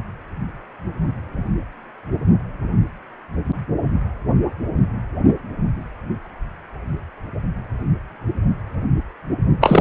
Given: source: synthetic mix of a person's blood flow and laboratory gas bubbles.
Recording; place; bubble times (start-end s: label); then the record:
Doppler ultrasound of blood flow; precordium
9.61-9.81 s: bubbles
From the record:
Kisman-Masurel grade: 213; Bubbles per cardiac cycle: several, 3 to 8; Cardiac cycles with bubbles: 1 to 10%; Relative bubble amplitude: loud (0.450 to 0.775); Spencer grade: 1 (occasional bubble signal discernible with the cardiac motion signal, with majority of cardiac periods free of bubbles); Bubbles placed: only in the low amplitude regions of the cardiac cycle